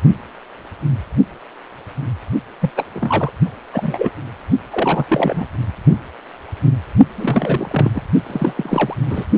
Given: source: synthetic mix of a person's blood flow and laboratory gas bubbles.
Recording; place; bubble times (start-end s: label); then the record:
Doppler ultrasound of blood flow; precordium
2.59-2.71 s: bubbles
2.75-2.84 s: bubbles
2.94-3.32 s: bubbles
3.73-4.10 s: bubbles
4.71-5.04 s: bubbles
5.08-5.46 s: bubbles
7.17-7.91 s: bubbles
7.95-8.02 s: bubbles
8.27-8.95 s: bubbles
9.05-9.26 s: bubbles
From the record:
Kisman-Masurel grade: 232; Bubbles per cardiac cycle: several, 3 to 8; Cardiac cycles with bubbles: 50 to 99%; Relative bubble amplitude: moderate (0.250 to 0.450); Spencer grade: 3 (all of the cardiac periods contain showers or single bubble signals, but not dominating or overriding the cardiac motion signals); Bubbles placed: only in the low amplitude regions of the cardiac cycle